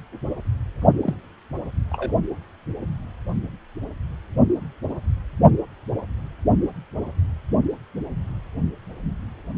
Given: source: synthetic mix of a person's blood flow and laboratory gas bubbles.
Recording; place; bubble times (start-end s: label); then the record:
Doppler ultrasound of blood flow; precordium
1.02-1.15 s: bubbles
1.91-2.12 s: bubbles
From the record:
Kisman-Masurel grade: 121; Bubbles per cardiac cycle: 1 to 2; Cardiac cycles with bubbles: 10 to 50%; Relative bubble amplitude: barely perceptible (0.100 to 0.250); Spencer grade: 2 (many but less than half of the cardiac periods contain bubble signals, singularly or in groups); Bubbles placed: only in the low amplitude regions of the cardiac cycle